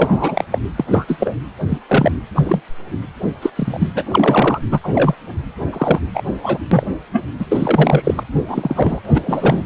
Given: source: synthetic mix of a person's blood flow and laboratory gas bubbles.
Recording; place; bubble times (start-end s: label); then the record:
Doppler ultrasound of blood flow; precordium
0.00-0.45 s: bubbles
0.50-0.58 s: bubbles
0.76-0.85 s: bubbles
0.90-1.37 s: bubbles
1.69-1.78 s: bubbles
1.88-2.11 s: bubbles
2.35-2.42 s: bubbles
2.44-2.60 s: bubbles
3.42-3.50 s: bubbles
3.56-3.93 s: bubbles
3.95-4.04 s: bubbles
4.12-4.60 s: bubbles
4.70-4.79 s: bubbles
4.83-5.15 s: bubbles
5.73-6.00 s: bubbles
6.14-6.22 s: bubbles
6.42-6.58 s: bubbles
6.71-6.87 s: bubbles
7.12-7.26 s: bubbles
7.39-7.46 s: bubbles
7.52-8.23 s: bubbles
8.47-9.00 s: bubbles
9.04-9.65 s: bubbles
From the record:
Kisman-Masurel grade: 243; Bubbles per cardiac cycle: several, 3 to 8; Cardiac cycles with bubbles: 100%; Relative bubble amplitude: loud (0.450 to 0.775); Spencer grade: 3 (all of the cardiac periods contain showers or single bubble signals, but not dominating or overriding the cardiac motion signals); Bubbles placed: anywhere in the cardiac cycle